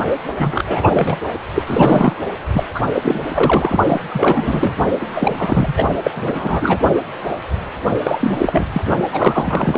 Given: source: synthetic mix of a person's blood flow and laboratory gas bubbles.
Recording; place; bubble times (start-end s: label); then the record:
Doppler ultrasound of blood flow; precordium
0.38-1.17 s: bubbles
1.54-1.63 s: bubbles
1.67-2.12 s: bubbles
2.52-2.64 s: bubbles
2.74-2.91 s: bubbles
2.94-3.23 s: bubbles
3.34-3.77 s: bubbles
3.86-4.01 s: bubbles
4.09-4.83 s: bubbles
5.00-5.73 s: bubbles
5.76-5.85 s: bubbles
6.03-6.11 s: bubbles
6.14-6.79 s: bubbles
8.04-8.67 s: bubbles
8.73-8.85 s: bubbles
8.89-8.97 s: bubbles
9.12-9.78 s: bubbles
From the record:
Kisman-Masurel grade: 333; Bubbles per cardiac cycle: rolling drumbeat, 9 or more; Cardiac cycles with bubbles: 50 to 99%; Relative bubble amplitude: loud (0.450 to 0.775); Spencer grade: 3 (all of the cardiac periods contain showers or single bubble signals, but not dominating or overriding the cardiac motion signals); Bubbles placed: anywhere in the cardiac cycle